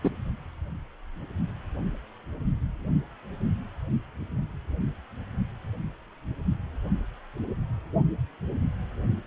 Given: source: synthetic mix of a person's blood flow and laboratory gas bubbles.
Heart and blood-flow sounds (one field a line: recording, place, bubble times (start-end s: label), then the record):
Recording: Doppler ultrasound of blood flow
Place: precordium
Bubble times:
0.04-0.09 s: bubbles
From the record:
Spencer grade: 1 (occasional bubble signal discernible with the cardiac motion signal, with majority of cardiac periods free of bubbles)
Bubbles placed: only in the low amplitude regions of the cardiac cycle